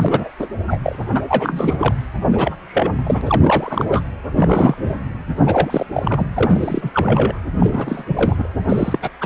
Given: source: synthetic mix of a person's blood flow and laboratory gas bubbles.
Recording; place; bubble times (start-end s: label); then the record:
Doppler ultrasound of blood flow; precordium
0.00-0.30 s: bubbles
0.39-0.49 s: bubbles
0.67-0.79 s: bubbles
0.83-0.96 s: bubbles
1.14-1.23 s: bubbles
1.27-1.95 s: bubbles
2.31-2.55 s: bubbles
2.66-3.21 s: bubbles
3.25-3.87 s: bubbles
3.92-4.02 s: bubbles
4.34-4.74 s: bubbles
4.77-4.98 s: bubbles
5.46-5.86 s: bubbles
5.94-6.26 s: bubbles
6.34-7.39 s: bubbles
7.59-8.04 s: bubbles
8.07-8.48 s: bubbles
8.69-8.98 s: bubbles
9.02-9.09 s: bubbles
9.21-9.26 s: bubbles
From the record:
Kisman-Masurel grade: 333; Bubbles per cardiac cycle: rolling drumbeat, 9 or more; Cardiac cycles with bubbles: 50 to 99%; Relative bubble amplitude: loud (0.450 to 0.775); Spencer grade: 3 (all of the cardiac periods contain showers or single bubble signals, but not dominating or overriding the cardiac motion signals); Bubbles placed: anywhere in the cardiac cycle